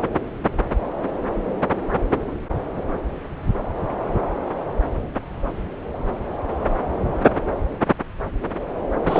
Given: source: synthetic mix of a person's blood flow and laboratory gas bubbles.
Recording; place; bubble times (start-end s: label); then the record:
Doppler ultrasound of blood flow; subclavian vein
9.05-9.20 s: bubbles
From the record:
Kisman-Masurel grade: 213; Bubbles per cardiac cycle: several, 3 to 8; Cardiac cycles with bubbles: 1 to 10%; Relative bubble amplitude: loud (0.450 to 0.775); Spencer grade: 1 (occasional bubble signal discernible with the cardiac motion signal, with majority of cardiac periods free of bubbles); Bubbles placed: anywhere in the cardiac cycle